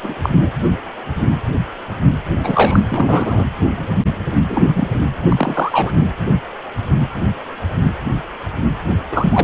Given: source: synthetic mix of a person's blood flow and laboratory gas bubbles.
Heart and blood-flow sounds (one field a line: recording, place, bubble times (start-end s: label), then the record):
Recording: Doppler ultrasound of blood flow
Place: precordium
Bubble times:
0.03-0.15 s: bubbles
0.23-0.30 s: bubbles
0.42-0.51 s: bubbles
2.43-2.81 s: bubbles
2.90-3.45 s: bubbles
4.50-4.68 s: bubbles
4.73-4.88 s: bubbles
5.32-5.92 s: bubbles
9.11-9.43 s: bubbles
From the record:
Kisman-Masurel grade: 223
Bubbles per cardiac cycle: several, 3 to 8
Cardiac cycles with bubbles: 10 to 50%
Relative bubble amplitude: loud (0.450 to 0.775)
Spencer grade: 2 (many but less than half of the cardiac periods contain bubble signals, singularly or in groups)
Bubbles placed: anywhere in the cardiac cycle